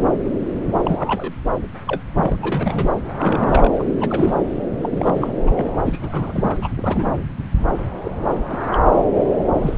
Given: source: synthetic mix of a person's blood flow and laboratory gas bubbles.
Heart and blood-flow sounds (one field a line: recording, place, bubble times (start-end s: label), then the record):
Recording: Doppler ultrasound of blood flow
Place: subclavian vein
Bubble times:
0.79-1.32 s: bubbles
1.86-2.01 s: bubbles
2.15-2.94 s: bubbles
3.18-3.70 s: bubbles
3.79-3.83 s: bubbles
4.00-4.36 s: bubbles
4.81-5.36 s: bubbles
5.46-5.50 s: bubbles
5.54-5.71 s: bubbles
5.84-6.57 s: bubbles
6.62-6.69 s: bubbles
6.77-7.15 s: bubbles
8.04-8.11 s: bubbles
8.21-8.43 s: bubbles
8.50-8.58 s: bubbles
8.72-8.79 s: bubbles
9.53-9.77 s: bubbles
From the record:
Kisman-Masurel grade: 232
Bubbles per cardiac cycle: several, 3 to 8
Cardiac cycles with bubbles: 50 to 99%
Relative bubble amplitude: moderate (0.250 to 0.450)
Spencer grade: 3 (all of the cardiac periods contain showers or single bubble signals, but not dominating or overriding the cardiac motion signals)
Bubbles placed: anywhere in the cardiac cycle